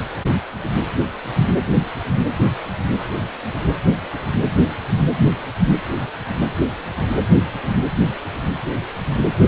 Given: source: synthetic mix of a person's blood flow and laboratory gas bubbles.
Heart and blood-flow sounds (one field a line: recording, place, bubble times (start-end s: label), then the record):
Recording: Doppler ultrasound of blood flow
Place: precordium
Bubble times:
no bubbles
From the record:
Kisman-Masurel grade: 000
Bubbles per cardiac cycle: 0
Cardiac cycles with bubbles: 0%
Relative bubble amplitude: no bubbles discernible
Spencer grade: 0 (complete lack of bubble signals)